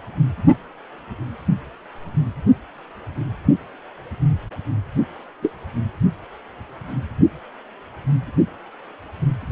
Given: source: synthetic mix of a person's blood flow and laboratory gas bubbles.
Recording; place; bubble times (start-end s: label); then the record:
Doppler ultrasound of blood flow; precordium
5.42-5.51 s: bubbles
From the record:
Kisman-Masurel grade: 112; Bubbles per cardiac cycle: 1 to 2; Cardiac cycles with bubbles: 1 to 10%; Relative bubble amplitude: moderate (0.250 to 0.450); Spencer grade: 1 (occasional bubble signal discernible with the cardiac motion signal, with majority of cardiac periods free of bubbles); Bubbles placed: only in the low amplitude regions of the cardiac cycle